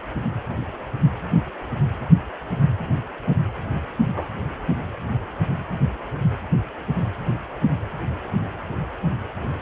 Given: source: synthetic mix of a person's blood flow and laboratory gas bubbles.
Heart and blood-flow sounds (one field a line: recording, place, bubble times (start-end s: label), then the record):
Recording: Doppler ultrasound of blood flow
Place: precordium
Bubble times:
3.98-4.31 s: bubbles
From the record:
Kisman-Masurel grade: 111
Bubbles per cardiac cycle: 1 to 2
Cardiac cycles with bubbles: 1 to 10%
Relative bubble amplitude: barely perceptible (0.100 to 0.250)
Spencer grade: 1 (occasional bubble signal discernible with the cardiac motion signal, with majority of cardiac periods free of bubbles)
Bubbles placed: anywhere in the cardiac cycle